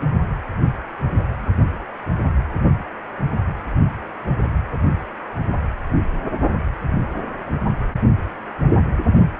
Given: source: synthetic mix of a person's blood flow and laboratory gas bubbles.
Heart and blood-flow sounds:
Doppler ultrasound of blood flow; precordium
no bubbles
From the record:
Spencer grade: 0 (complete lack of bubble signals)

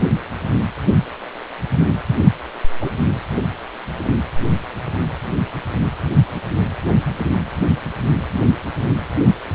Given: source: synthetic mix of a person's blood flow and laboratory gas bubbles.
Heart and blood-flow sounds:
Doppler ultrasound of blood flow; precordium
2.80-2.90 s: bubbles
From the record:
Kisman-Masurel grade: 122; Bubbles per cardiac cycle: 1 to 2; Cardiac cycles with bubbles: 10 to 50%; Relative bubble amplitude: moderate (0.250 to 0.450); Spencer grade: 2 (many but less than half of the cardiac periods contain bubble signals, singularly or in groups); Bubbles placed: anywhere in the cardiac cycle

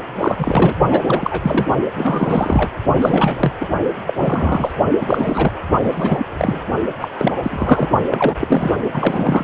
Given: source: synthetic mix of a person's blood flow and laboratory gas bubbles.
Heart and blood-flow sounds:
Doppler ultrasound of blood flow; precordium
0.20-0.35 s: bubbles
0.38-0.75 s: bubbles
0.91-1.02 s: bubbles
1.06-1.67 s: bubbles
1.96-2.79 s: bubbles
2.97-3.52 s: bubbles
3.61-3.67 s: bubbles
4.07-4.13 s: bubbles
4.17-4.71 s: bubbles
5.01-5.54 s: bubbles
5.82-6.25 s: bubbles
6.38-6.60 s: bubbles
7.00-7.08 s: bubbles
7.17-7.33 s: bubbles
7.42-7.89 s: bubbles
8.10-8.36 s: bubbles
8.40-8.71 s: bubbles
8.92-9.44 s: bubbles
From the record:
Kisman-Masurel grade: 342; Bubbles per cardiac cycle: rolling drumbeat, 9 or more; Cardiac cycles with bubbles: 100%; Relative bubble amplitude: moderate (0.250 to 0.450); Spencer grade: 3 (all of the cardiac periods contain showers or single bubble signals, but not dominating or overriding the cardiac motion signals); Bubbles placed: only in the low amplitude regions of the cardiac cycle

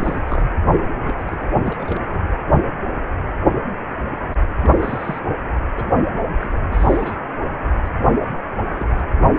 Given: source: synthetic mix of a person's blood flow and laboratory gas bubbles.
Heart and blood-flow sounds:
Doppler ultrasound of blood flow; precordium
0.00-0.21 s: bubbles
0.24-0.42 s: bubbles
1.07-1.54 s: bubbles
1.57-2.21 s: bubbles
4.62-5.51 s: bubbles
5.75-5.88 s: bubbles
6.41-6.49 s: bubbles
6.71-7.17 s: bubbles
7.85-7.89 s: bubbles
8.04-8.13 s: bubbles
8.21-8.28 s: bubbles
8.65-9.07 s: bubbles
From the record:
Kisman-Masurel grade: 221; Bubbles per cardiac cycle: several, 3 to 8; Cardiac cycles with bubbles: 10 to 50%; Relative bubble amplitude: barely perceptible (0.100 to 0.250); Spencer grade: 2 (many but less than half of the cardiac periods contain bubble signals, singularly or in groups); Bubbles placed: anywhere in the cardiac cycle

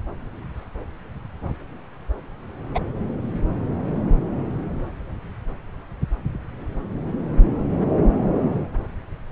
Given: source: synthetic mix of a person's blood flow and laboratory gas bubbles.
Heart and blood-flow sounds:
Doppler ultrasound of blood flow; subclavian vein
2.75-2.80 s: bubbles
From the record:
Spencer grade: 1 (occasional bubble signal discernible with the cardiac motion signal, with majority of cardiac periods free of bubbles); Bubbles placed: anywhere in the cardiac cycle

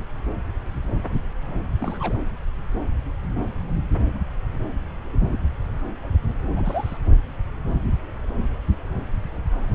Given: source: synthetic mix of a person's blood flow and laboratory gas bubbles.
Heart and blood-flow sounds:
Doppler ultrasound of blood flow; subclavian vein
1.80-2.17 s: bubbles
6.56-6.99 s: bubbles
From the record:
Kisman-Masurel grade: 221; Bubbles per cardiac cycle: several, 3 to 8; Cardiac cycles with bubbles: 10 to 50%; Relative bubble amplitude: barely perceptible (0.100 to 0.250); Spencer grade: 2 (many but less than half of the cardiac periods contain bubble signals, singularly or in groups); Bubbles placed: anywhere in the cardiac cycle

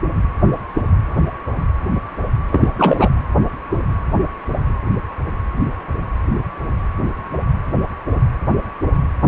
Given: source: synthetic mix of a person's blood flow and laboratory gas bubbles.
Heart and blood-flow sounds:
Doppler ultrasound of blood flow; precordium
2.51-2.68 s: bubbles
2.78-3.09 s: bubbles
From the record:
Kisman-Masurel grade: 213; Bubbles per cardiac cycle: several, 3 to 8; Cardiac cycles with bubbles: 1 to 10%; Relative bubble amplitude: loud (0.450 to 0.775); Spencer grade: 1 (occasional bubble signal discernible with the cardiac motion signal, with majority of cardiac periods free of bubbles); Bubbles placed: anywhere in the cardiac cycle

